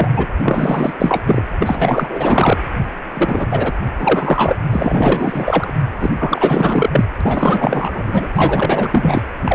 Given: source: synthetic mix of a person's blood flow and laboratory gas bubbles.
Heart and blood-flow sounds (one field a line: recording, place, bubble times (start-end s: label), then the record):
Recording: Doppler ultrasound of blood flow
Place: precordium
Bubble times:
0.00-0.08 s: bubbles
0.11-0.26 s: bubbles
0.43-1.23 s: bubbles
1.27-1.44 s: bubbles
1.60-2.58 s: bubbles
3.13-3.47 s: bubbles
3.50-3.72 s: bubbles
3.99-4.56 s: bubbles
4.67-5.75 s: bubbles
6.00-6.11 s: bubbles
6.18-6.90 s: bubbles
6.92-7.08 s: bubbles
7.21-8.27 s: bubbles
8.35-9.21 s: bubbles
9.45-9.55 s: bubbles
From the record:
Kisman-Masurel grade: 444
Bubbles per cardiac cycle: continuous sound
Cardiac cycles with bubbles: 100%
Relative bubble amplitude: maximal (0.775 to 0.999)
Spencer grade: 4 (maximum detectable bubble signal sounding continuously throughout systole and diastole of every cardiac period, and overriding the amplitude of the normal cardiac signals)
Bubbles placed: anywhere in the cardiac cycle